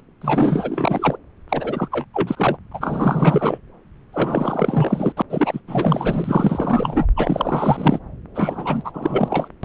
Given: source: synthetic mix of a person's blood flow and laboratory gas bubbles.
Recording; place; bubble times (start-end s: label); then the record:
Doppler ultrasound of blood flow; subclavian vein
0.21-1.18 s: bubbles
1.49-1.88 s: bubbles
1.91-2.05 s: bubbles
2.13-2.57 s: bubbles
2.71-3.58 s: bubbles
4.12-5.12 s: bubbles
5.17-5.22 s: bubbles
5.30-5.61 s: bubbles
5.67-7.07 s: bubbles
7.16-8.00 s: bubbles
8.34-9.48 s: bubbles
9.63-9.65 s: bubbles
From the record:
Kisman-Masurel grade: 444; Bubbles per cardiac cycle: continuous sound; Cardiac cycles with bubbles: 100%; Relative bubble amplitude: maximal (0.775 to 0.999); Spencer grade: 4 (maximum detectable bubble signal sounding continuously throughout systole and diastole of every cardiac period, and overriding the amplitude of the normal cardiac signals); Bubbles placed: anywhere in the cardiac cycle